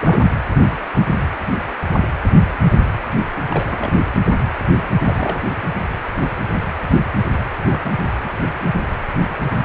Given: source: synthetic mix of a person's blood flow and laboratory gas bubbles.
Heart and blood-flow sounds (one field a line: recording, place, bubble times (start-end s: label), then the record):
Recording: Doppler ultrasound of blood flow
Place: precordium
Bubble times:
0.00-0.20 s: bubbles
3.50-3.93 s: bubbles
5.00-5.42 s: bubbles
7.70-7.80 s: bubbles
7.83-7.93 s: bubbles
8.24-8.29 s: bubbles
From the record:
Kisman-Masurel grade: 221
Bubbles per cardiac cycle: several, 3 to 8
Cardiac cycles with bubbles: 10 to 50%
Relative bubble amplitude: barely perceptible (0.100 to 0.250)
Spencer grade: 2 (many but less than half of the cardiac periods contain bubble signals, singularly or in groups)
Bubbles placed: anywhere in the cardiac cycle